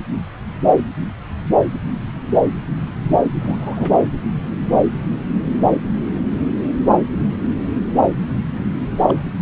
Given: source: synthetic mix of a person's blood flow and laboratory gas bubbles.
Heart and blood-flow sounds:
Doppler ultrasound of blood flow; subclavian vein
3.41-4.04 s: bubbles
9.08-9.23 s: bubbles
From the record:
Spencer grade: 2 (many but less than half of the cardiac periods contain bubble signals, singularly or in groups); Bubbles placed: anywhere in the cardiac cycle

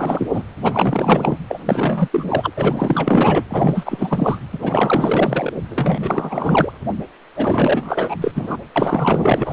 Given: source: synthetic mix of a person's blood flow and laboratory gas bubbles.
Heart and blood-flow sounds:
Doppler ultrasound of blood flow; precordium
0.00-0.43 s: bubbles
0.62-1.38 s: bubbles
1.48-1.58 s: bubbles
1.65-2.08 s: bubbles
2.12-2.53 s: bubbles
2.57-3.44 s: bubbles
3.49-4.38 s: bubbles
4.53-5.53 s: bubbles
5.70-6.73 s: bubbles
7.36-8.15 s: bubbles
8.21-8.32 s: bubbles
8.35-8.57 s: bubbles
8.76-9.52 s: bubbles
From the record:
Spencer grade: 4 (maximum detectable bubble signal sounding continuously throughout systole and diastole of every cardiac period, and overriding the amplitude of the normal cardiac signals); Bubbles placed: anywhere in the cardiac cycle

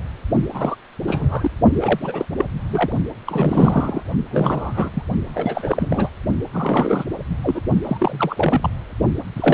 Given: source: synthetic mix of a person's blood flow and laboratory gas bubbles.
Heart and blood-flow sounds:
Doppler ultrasound of blood flow; precordium
0.52-0.75 s: bubbles
1.07-1.50 s: bubbles
1.74-2.25 s: bubbles
2.38-2.45 s: bubbles
2.69-2.92 s: bubbles
3.27-4.04 s: bubbles
4.31-4.90 s: bubbles
4.94-5.03 s: bubbles
5.27-6.09 s: bubbles
6.53-7.05 s: bubbles
7.43-7.61 s: bubbles
7.83-8.70 s: bubbles
9.35-9.53 s: bubbles
From the record:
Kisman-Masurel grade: 342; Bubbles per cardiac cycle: rolling drumbeat, 9 or more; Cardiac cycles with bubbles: 100%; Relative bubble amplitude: moderate (0.250 to 0.450); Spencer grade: 3 (all of the cardiac periods contain showers or single bubble signals, but not dominating or overriding the cardiac motion signals); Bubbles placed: only in the low amplitude regions of the cardiac cycle

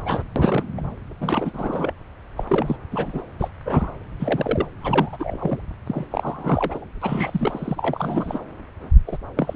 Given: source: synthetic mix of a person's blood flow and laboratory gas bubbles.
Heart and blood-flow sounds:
Doppler ultrasound of blood flow; subclavian vein
0.05-0.23 s: bubbles
0.36-0.64 s: bubbles
0.77-0.81 s: bubbles
1.20-1.92 s: bubbles
2.36-2.45 s: bubbles
2.49-2.76 s: bubbles
2.91-3.21 s: bubbles
3.38-3.48 s: bubbles
3.65-3.92 s: bubbles
4.20-4.66 s: bubbles
4.80-5.63 s: bubbles
5.86-6.06 s: bubbles
6.10-6.88 s: bubbles
7.01-8.39 s: bubbles
9.07-9.17 s: bubbles
9.35-9.56 s: bubbles
From the record:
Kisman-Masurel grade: 342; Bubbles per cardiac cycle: rolling drumbeat, 9 or more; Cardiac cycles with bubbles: 100%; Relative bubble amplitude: moderate (0.250 to 0.450); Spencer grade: 3 (all of the cardiac periods contain showers or single bubble signals, but not dominating or overriding the cardiac motion signals); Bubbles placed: anywhere in the cardiac cycle

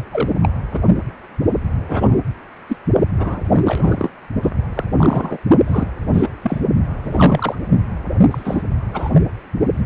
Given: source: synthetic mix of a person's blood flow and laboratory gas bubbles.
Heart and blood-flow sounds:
Doppler ultrasound of blood flow; precordium
0.11-0.33 s: bubbles
0.42-0.49 s: bubbles
0.73-0.82 s: bubbles
1.88-2.15 s: bubbles
2.68-2.77 s: bubbles
3.17-3.42 s: bubbles
3.54-4.10 s: bubbles
4.43-4.52 s: bubbles
4.75-4.84 s: bubbles
4.96-5.40 s: bubbles
5.67-5.91 s: bubbles
6.14-6.29 s: bubbles
6.42-6.62 s: bubbles
7.04-7.56 s: bubbles
8.30-8.63 s: bubbles
8.93-9.22 s: bubbles
From the record:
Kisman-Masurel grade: 233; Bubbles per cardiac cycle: several, 3 to 8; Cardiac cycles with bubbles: 50 to 99%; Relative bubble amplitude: loud (0.450 to 0.775); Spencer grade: 3 (all of the cardiac periods contain showers or single bubble signals, but not dominating or overriding the cardiac motion signals); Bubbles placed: only in the low amplitude regions of the cardiac cycle

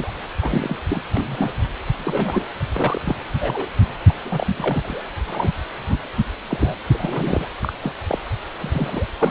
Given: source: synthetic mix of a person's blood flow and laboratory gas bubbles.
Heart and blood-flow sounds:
Doppler ultrasound of blood flow; precordium
0.00-0.12 s: bubbles
0.41-0.77 s: bubbles
0.89-1.02 s: bubbles
1.15-1.25 s: bubbles
1.27-1.51 s: bubbles
1.94-2.46 s: bubbles
2.73-3.01 s: bubbles
3.05-3.17 s: bubbles
3.40-3.66 s: bubbles
4.09-4.13 s: bubbles
4.22-5.04 s: bubbles
5.27-5.53 s: bubbles
5.75-5.98 s: bubbles
6.47-6.75 s: bubbles
6.88-7.47 s: bubbles
7.61-7.72 s: bubbles
7.82-7.92 s: bubbles
8.07-8.18 s: bubbles
8.58-9.08 s: bubbles
9.19-9.31 s: bubbles
From the record:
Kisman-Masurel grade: 242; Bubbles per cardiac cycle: several, 3 to 8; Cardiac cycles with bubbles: 100%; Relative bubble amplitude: moderate (0.250 to 0.450); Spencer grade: 3 (all of the cardiac periods contain showers or single bubble signals, but not dominating or overriding the cardiac motion signals); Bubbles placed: anywhere in the cardiac cycle

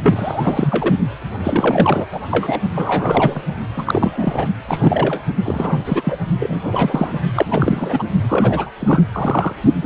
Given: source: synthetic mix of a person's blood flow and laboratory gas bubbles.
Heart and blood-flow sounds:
Doppler ultrasound of blood flow; precordium
0.03-0.95 s: bubbles
1.42-2.06 s: bubbles
2.12-2.20 s: bubbles
2.31-2.60 s: bubbles
2.75-3.42 s: bubbles
3.76-4.46 s: bubbles
4.67-5.21 s: bubbles
5.45-6.17 s: bubbles
6.39-6.60 s: bubbles
6.63-7.12 s: bubbles
7.36-8.04 s: bubbles
8.28-8.71 s: bubbles
8.79-9.04 s: bubbles
9.12-9.55 s: bubbles
9.81-9.86 s: bubbles
From the record:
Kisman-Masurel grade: 342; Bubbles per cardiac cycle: rolling drumbeat, 9 or more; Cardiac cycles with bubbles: 100%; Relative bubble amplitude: moderate (0.250 to 0.450); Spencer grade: 3 (all of the cardiac periods contain showers or single bubble signals, but not dominating or overriding the cardiac motion signals); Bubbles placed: only in the low amplitude regions of the cardiac cycle

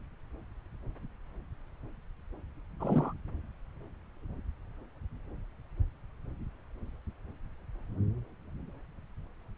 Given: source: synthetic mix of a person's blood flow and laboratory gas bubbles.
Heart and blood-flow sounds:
Doppler ultrasound of blood flow; subclavian vein
2.79-3.13 s: bubbles
From the record:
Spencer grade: 1 (occasional bubble signal discernible with the cardiac motion signal, with majority of cardiac periods free of bubbles); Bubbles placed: anywhere in the cardiac cycle

